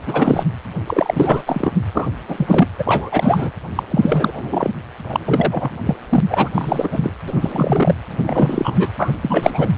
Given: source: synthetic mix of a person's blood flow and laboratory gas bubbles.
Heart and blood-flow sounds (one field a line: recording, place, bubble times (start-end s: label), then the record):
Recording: Doppler ultrasound of blood flow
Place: precordium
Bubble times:
0.06-0.45 s: bubbles
0.86-1.71 s: bubbles
1.94-2.08 s: bubbles
2.28-2.69 s: bubbles
2.79-3.51 s: bubbles
3.75-3.83 s: bubbles
3.90-4.70 s: bubbles
5.09-5.20 s: bubbles
5.25-5.70 s: bubbles
5.85-5.95 s: bubbles
6.09-6.21 s: bubbles
6.29-6.50 s: bubbles
6.54-7.12 s: bubbles
7.28-7.95 s: bubbles
8.18-8.88 s: bubbles
8.99-9.12 s: bubbles
9.22-9.69 s: bubbles
From the record:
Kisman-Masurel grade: 343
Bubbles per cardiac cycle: rolling drumbeat, 9 or more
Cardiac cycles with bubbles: 100%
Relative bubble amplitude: loud (0.450 to 0.775)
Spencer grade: 3 (all of the cardiac periods contain showers or single bubble signals, but not dominating or overriding the cardiac motion signals)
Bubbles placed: anywhere in the cardiac cycle